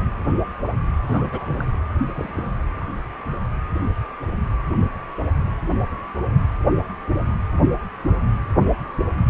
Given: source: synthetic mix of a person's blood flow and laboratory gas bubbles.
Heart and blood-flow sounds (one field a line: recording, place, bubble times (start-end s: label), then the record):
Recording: Doppler ultrasound of blood flow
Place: precordium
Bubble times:
1.04-1.78 s: bubbles
2.07-2.59 s: bubbles
From the record:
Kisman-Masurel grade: 221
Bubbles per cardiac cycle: several, 3 to 8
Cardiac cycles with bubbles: 10 to 50%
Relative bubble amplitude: barely perceptible (0.100 to 0.250)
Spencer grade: 2 (many but less than half of the cardiac periods contain bubble signals, singularly or in groups)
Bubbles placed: anywhere in the cardiac cycle